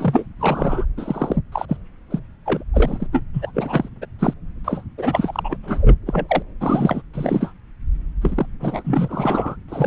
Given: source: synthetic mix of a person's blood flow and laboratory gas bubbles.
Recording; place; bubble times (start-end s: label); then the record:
Doppler ultrasound of blood flow; subclavian vein
0.00-0.26 s: bubbles
0.39-0.85 s: bubbles
0.97-1.36 s: bubbles
1.52-1.66 s: bubbles
1.69-1.77 s: bubbles
2.10-2.19 s: bubbles
2.46-2.63 s: bubbles
2.73-3.08 s: bubbles
3.12-3.22 s: bubbles
3.33-3.52 s: bubbles
3.54-3.89 s: bubbles
4.02-4.06 s: bubbles
4.19-4.34 s: bubbles
4.64-4.84 s: bubbles
4.98-5.57 s: bubbles
5.63-5.96 s: bubbles
6.06-6.43 s: bubbles
6.61-7.02 s: bubbles
7.14-7.52 s: bubbles
8.21-8.46 s: bubbles
8.60-9.57 s: bubbles
9.68-9.87 s: bubbles
From the record:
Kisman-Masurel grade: 242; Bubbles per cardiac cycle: several, 3 to 8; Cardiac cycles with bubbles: 100%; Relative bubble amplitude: moderate (0.250 to 0.450); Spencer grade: 3 (all of the cardiac periods contain showers or single bubble signals, but not dominating or overriding the cardiac motion signals); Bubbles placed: anywhere in the cardiac cycle